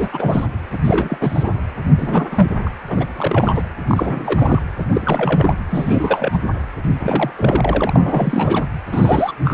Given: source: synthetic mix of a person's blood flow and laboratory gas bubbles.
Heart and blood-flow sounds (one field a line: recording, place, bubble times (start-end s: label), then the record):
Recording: Doppler ultrasound of blood flow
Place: precordium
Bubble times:
0.00-0.47 s: bubbles
0.72-0.78 s: bubbles
0.84-1.17 s: bubbles
1.20-1.50 s: bubbles
1.97-2.28 s: bubbles
2.31-2.49 s: bubbles
2.66-2.70 s: bubbles
2.88-3.09 s: bubbles
3.17-3.67 s: bubbles
3.87-4.62 s: bubbles
4.78-4.83 s: bubbles
4.92-5.54 s: bubbles
5.69-6.39 s: bubbles
6.83-6.90 s: bubbles
7.00-7.31 s: bubbles
7.36-8.65 s: bubbles
8.92-9.33 s: bubbles
9.45-9.54 s: bubbles
From the record:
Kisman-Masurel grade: 342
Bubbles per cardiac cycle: rolling drumbeat, 9 or more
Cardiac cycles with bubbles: 100%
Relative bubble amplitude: moderate (0.250 to 0.450)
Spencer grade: 3 (all of the cardiac periods contain showers or single bubble signals, but not dominating or overriding the cardiac motion signals)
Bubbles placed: anywhere in the cardiac cycle